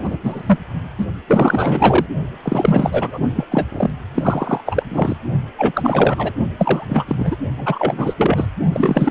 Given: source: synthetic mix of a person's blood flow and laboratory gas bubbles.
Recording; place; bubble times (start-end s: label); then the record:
Doppler ultrasound of blood flow; precordium
0.00-0.18 s: bubbles
0.22-0.58 s: bubbles
0.98-1.06 s: bubbles
1.27-2.06 s: bubbles
2.42-3.19 s: bubbles
3.35-3.45 s: bubbles
3.51-3.65 s: bubbles
3.72-3.90 s: bubbles
4.14-4.61 s: bubbles
4.65-4.84 s: bubbles
4.90-5.16 s: bubbles
5.57-6.32 s: bubbles
6.58-7.36 s: bubbles
7.57-8.14 s: bubbles
8.17-8.47 s: bubbles
8.73-9.11 s: bubbles
From the record:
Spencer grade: 4 (maximum detectable bubble signal sounding continuously throughout systole and diastole of every cardiac period, and overriding the amplitude of the normal cardiac signals); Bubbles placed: only in the low amplitude regions of the cardiac cycle